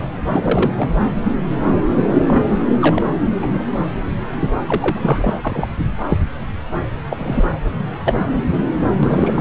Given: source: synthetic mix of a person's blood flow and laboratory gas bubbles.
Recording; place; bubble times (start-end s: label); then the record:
Doppler ultrasound of blood flow; subclavian vein
0.26-0.72 s: bubbles
0.76-0.89 s: bubbles
1.04-1.12 s: bubbles
1.24-1.33 s: bubbles
2.27-2.54 s: bubbles
2.81-3.05 s: bubbles
3.42-3.46 s: bubbles
3.54-3.62 s: bubbles
4.67-5.34 s: bubbles
5.42-5.67 s: bubbles
6.08-6.18 s: bubbles
7.10-7.47 s: bubbles
8.04-8.27 s: bubbles
9.03-9.41 s: bubbles
From the record:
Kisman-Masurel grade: 242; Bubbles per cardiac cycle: several, 3 to 8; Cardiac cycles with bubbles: 100%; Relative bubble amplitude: moderate (0.250 to 0.450); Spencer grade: 3 (all of the cardiac periods contain showers or single bubble signals, but not dominating or overriding the cardiac motion signals); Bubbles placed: anywhere in the cardiac cycle